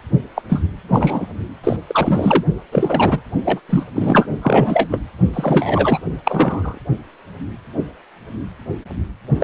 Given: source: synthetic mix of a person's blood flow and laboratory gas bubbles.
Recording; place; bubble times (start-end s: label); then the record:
Doppler ultrasound of blood flow; precordium
0.35-0.42 s: bubbles
0.49-0.62 s: bubbles
0.88-1.27 s: bubbles
1.64-1.77 s: bubbles
1.87-2.44 s: bubbles
2.71-3.21 s: bubbles
3.44-3.60 s: bubbles
3.69-3.84 s: bubbles
3.94-4.26 s: bubbles
4.41-4.88 s: bubbles
4.91-5.01 s: bubbles
5.33-5.99 s: bubbles
6.24-6.78 s: bubbles
9.39-9.44 s: bubbles
From the record:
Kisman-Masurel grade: 233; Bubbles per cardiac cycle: several, 3 to 8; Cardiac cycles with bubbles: 50 to 99%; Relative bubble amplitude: loud (0.450 to 0.775); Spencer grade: 3 (all of the cardiac periods contain showers or single bubble signals, but not dominating or overriding the cardiac motion signals); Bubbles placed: only in the low amplitude regions of the cardiac cycle